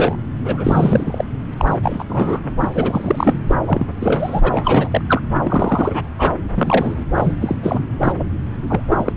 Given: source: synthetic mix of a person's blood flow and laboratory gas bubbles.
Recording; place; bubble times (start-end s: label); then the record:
Doppler ultrasound of blood flow; subclavian vein
0.00-0.16 s: bubbles
0.44-1.25 s: bubbles
1.52-1.54 s: bubbles
1.58-1.79 s: bubbles
1.82-2.04 s: bubbles
2.09-2.40 s: bubbles
2.60-3.41 s: bubbles
3.48-3.55 s: bubbles
3.65-3.87 s: bubbles
4.00-4.40 s: bubbles
4.42-5.01 s: bubbles
5.08-5.21 s: bubbles
5.43-6.08 s: bubbles
6.18-6.32 s: bubbles
6.54-7.04 s: bubbles
7.14-7.56 s: bubbles
7.62-7.83 s: bubbles
8.00-8.12 s: bubbles
8.19-8.24 s: bubbles
8.68-8.81 s: bubbles
8.88-9.13 s: bubbles
From the record:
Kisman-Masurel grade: 343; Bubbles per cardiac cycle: rolling drumbeat, 9 or more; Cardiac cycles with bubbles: 100%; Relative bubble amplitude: loud (0.450 to 0.775); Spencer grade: 3 (all of the cardiac periods contain showers or single bubble signals, but not dominating or overriding the cardiac motion signals); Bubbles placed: anywhere in the cardiac cycle